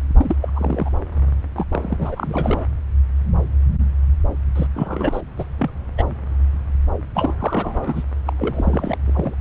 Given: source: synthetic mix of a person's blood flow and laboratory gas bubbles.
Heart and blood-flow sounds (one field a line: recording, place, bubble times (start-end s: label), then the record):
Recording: Doppler ultrasound of blood flow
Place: subclavian vein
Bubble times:
0.15-0.36 s: bubbles
0.41-0.90 s: bubbles
1.55-1.64 s: bubbles
1.72-2.65 s: bubbles
4.55-4.67 s: bubbles
4.75-5.21 s: bubbles
5.38-5.45 s: bubbles
5.58-5.71 s: bubbles
5.98-6.04 s: bubbles
7.15-7.33 s: bubbles
7.39-8.04 s: bubbles
8.25-8.33 s: bubbles
8.38-8.98 s: bubbles
9.06-9.35 s: bubbles
From the record:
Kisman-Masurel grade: 332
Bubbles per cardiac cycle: rolling drumbeat, 9 or more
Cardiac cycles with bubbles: 50 to 99%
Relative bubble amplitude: moderate (0.250 to 0.450)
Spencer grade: 3 (all of the cardiac periods contain showers or single bubble signals, but not dominating or overriding the cardiac motion signals)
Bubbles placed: anywhere in the cardiac cycle